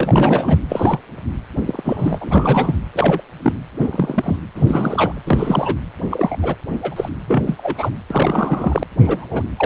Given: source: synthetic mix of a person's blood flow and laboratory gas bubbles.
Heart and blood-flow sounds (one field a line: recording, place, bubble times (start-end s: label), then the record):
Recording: Doppler ultrasound of blood flow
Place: precordium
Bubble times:
0.00-0.59 s: bubbles
0.69-0.99 s: bubbles
1.67-1.81 s: bubbles
1.84-2.75 s: bubbles
2.94-3.22 s: bubbles
3.42-3.53 s: bubbles
3.79-4.37 s: bubbles
4.55-5.19 s: bubbles
5.25-5.75 s: bubbles
6.10-6.37 s: bubbles
6.42-6.55 s: bubbles
6.82-7.09 s: bubbles
7.28-7.43 s: bubbles
7.46-7.91 s: bubbles
8.10-8.84 s: bubbles
8.99-9.27 s: bubbles
9.31-9.42 s: bubbles
9.57-9.66 s: bubbles
From the record:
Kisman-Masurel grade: 242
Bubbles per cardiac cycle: several, 3 to 8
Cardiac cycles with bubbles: 100%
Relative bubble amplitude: moderate (0.250 to 0.450)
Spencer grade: 3 (all of the cardiac periods contain showers or single bubble signals, but not dominating or overriding the cardiac motion signals)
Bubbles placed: anywhere in the cardiac cycle